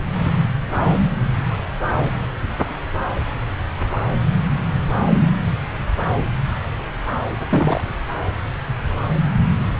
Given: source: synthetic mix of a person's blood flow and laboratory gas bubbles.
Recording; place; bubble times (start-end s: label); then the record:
Doppler ultrasound of blood flow; subclavian vein
7.49-7.81 s: bubbles
From the record:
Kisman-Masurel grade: 113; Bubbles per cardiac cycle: 1 to 2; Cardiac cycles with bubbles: 1 to 10%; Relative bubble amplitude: loud (0.450 to 0.775); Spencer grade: 1 (occasional bubble signal discernible with the cardiac motion signal, with majority of cardiac periods free of bubbles); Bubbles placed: anywhere in the cardiac cycle